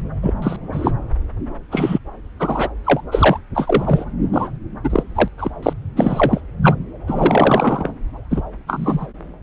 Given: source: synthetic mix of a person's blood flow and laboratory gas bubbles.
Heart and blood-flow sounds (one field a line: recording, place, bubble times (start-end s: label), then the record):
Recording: Doppler ultrasound of blood flow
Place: subclavian vein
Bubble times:
0.22-0.33 s: bubbles
0.42-0.56 s: bubbles
0.72-0.92 s: bubbles
1.71-1.98 s: bubbles
2.39-2.69 s: bubbles
2.84-3.00 s: bubbles
3.11-3.38 s: bubbles
3.54-4.05 s: bubbles
4.33-4.48 s: bubbles
4.83-5.03 s: bubbles
5.15-5.28 s: bubbles
5.38-5.50 s: bubbles
5.62-5.73 s: bubbles
5.96-6.41 s: bubbles
6.63-6.75 s: bubbles
7.07-7.93 s: bubbles
8.30-8.42 s: bubbles
8.67-9.07 s: bubbles
From the record:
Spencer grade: 3 (all of the cardiac periods contain showers or single bubble signals, but not dominating or overriding the cardiac motion signals)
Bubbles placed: anywhere in the cardiac cycle